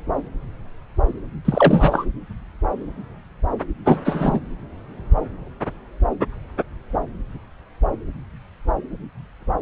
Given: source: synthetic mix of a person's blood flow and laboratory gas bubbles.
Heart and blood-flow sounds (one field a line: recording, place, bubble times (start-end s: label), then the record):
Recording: Doppler ultrasound of blood flow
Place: subclavian vein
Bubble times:
1.45-2.06 s: bubbles
3.85-3.98 s: bubbles
4.04-4.40 s: bubbles
From the record:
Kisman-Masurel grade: 223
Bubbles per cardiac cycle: several, 3 to 8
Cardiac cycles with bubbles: 10 to 50%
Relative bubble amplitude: loud (0.450 to 0.775)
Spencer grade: 2 (many but less than half of the cardiac periods contain bubble signals, singularly or in groups)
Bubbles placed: anywhere in the cardiac cycle